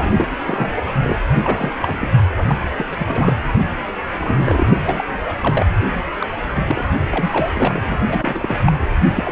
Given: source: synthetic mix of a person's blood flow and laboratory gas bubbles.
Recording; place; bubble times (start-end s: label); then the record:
Doppler ultrasound of blood flow; precordium
0.00-0.36 s: bubbles
0.46-0.74 s: bubbles
0.78-0.83 s: bubbles
1.02-1.19 s: bubbles
1.34-1.74 s: bubbles
1.80-2.08 s: bubbles
2.35-2.55 s: bubbles
2.77-2.96 s: bubbles
2.98-3.34 s: bubbles
4.14-4.81 s: bubbles
4.85-5.04 s: bubbles
5.28-5.33 s: bubbles
5.41-5.66 s: bubbles
6.19-6.27 s: bubbles
6.54-6.64 s: bubbles
6.68-6.83 s: bubbles
7.10-7.80 s: bubbles
7.86-7.97 s: bubbles
8.08-8.55 s: bubbles
8.66-8.72 s: bubbles
9.15-9.32 s: bubbles
From the record:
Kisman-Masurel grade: 342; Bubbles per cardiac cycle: rolling drumbeat, 9 or more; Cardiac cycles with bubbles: 100%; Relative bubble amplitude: moderate (0.250 to 0.450); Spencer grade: 3 (all of the cardiac periods contain showers or single bubble signals, but not dominating or overriding the cardiac motion signals); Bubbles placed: anywhere in the cardiac cycle